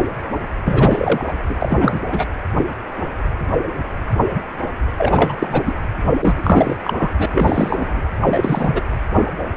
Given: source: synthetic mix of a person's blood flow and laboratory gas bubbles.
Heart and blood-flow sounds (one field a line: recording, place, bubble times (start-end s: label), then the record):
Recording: Doppler ultrasound of blood flow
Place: precordium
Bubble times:
0.65-1.33 s: bubbles
1.48-1.56 s: bubbles
1.61-2.02 s: bubbles
2.12-2.27 s: bubbles
4.98-5.62 s: bubbles
5.65-5.74 s: bubbles
6.20-6.77 s: bubbles
6.84-6.94 s: bubbles
6.98-7.10 s: bubbles
7.18-7.26 s: bubbles
7.30-8.00 s: bubbles
8.25-8.81 s: bubbles
From the record:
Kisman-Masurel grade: 333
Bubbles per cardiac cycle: rolling drumbeat, 9 or more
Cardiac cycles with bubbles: 50 to 99%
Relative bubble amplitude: loud (0.450 to 0.775)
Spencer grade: 3 (all of the cardiac periods contain showers or single bubble signals, but not dominating or overriding the cardiac motion signals)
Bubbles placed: anywhere in the cardiac cycle